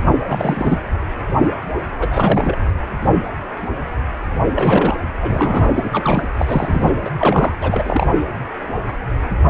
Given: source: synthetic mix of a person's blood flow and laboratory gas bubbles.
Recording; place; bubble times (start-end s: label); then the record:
Doppler ultrasound of blood flow; precordium
0.29-0.81 s: bubbles
2.00-2.58 s: bubbles
4.54-4.95 s: bubbles
5.22-5.89 s: bubbles
5.92-6.27 s: bubbles
6.38-6.92 s: bubbles
7.04-7.10 s: bubbles
7.17-7.57 s: bubbles
7.61-8.07 s: bubbles
From the record:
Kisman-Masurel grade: 332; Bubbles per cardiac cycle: rolling drumbeat, 9 or more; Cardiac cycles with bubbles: 50 to 99%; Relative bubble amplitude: moderate (0.250 to 0.450); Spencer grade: 3 (all of the cardiac periods contain showers or single bubble signals, but not dominating or overriding the cardiac motion signals); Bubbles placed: anywhere in the cardiac cycle